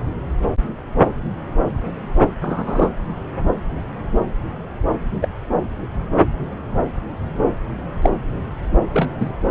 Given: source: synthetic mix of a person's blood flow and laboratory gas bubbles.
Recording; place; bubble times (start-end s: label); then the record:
Doppler ultrasound of blood flow; subclavian vein
2.41-2.90 s: bubbles
5.21-5.28 s: bubbles
8.02-8.10 s: bubbles
8.93-9.08 s: bubbles
9.20-9.32 s: bubbles
From the record:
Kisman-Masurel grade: 123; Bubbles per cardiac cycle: 1 to 2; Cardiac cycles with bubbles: 10 to 50%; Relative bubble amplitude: loud (0.450 to 0.775); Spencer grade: 2 (many but less than half of the cardiac periods contain bubble signals, singularly or in groups); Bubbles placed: anywhere in the cardiac cycle